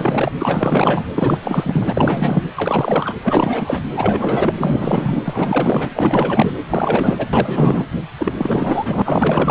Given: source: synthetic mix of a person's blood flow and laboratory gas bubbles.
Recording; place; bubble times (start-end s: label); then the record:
Doppler ultrasound of blood flow; precordium
0.00-0.32 s: bubbles
0.38-1.04 s: bubbles
1.16-1.39 s: bubbles
1.43-2.44 s: bubbles
2.56-3.17 s: bubbles
3.23-3.80 s: bubbles
3.93-4.54 s: bubbles
4.60-5.89 s: bubbles
5.94-6.52 s: bubbles
6.67-7.30 s: bubbles
7.32-7.86 s: bubbles
8.19-8.34 s: bubbles
8.38-9.02 s: bubbles
9.04-9.51 s: bubbles
From the record:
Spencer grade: 4 (maximum detectable bubble signal sounding continuously throughout systole and diastole of every cardiac period, and overriding the amplitude of the normal cardiac signals); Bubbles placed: anywhere in the cardiac cycle